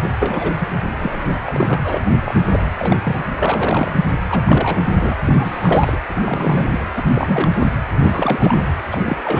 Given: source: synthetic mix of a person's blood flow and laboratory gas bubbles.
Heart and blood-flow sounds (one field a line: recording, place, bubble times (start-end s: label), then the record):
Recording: Doppler ultrasound of blood flow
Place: precordium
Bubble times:
0.00-0.11 s: bubbles
0.22-0.53 s: bubbles
0.60-0.66 s: bubbles
1.02-1.38 s: bubbles
1.47-1.81 s: bubbles
1.84-2.02 s: bubbles
2.24-2.69 s: bubbles
2.79-2.96 s: bubbles
3.04-3.18 s: bubbles
3.37-3.96 s: bubbles
4.28-4.44 s: bubbles
4.47-4.82 s: bubbles
4.84-5.16 s: bubbles
5.24-5.96 s: bubbles
6.08-6.66 s: bubbles
6.71-6.83 s: bubbles
6.96-7.01 s: bubbles
7.14-7.51 s: bubbles
7.59-7.67 s: bubbles
8.03-8.63 s: bubbles
8.92-9.18 s: bubbles
9.24-9.40 s: bubbles
From the record:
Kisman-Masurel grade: 342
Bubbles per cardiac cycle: rolling drumbeat, 9 or more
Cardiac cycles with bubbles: 100%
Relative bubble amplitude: moderate (0.250 to 0.450)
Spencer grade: 3 (all of the cardiac periods contain showers or single bubble signals, but not dominating or overriding the cardiac motion signals)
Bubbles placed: anywhere in the cardiac cycle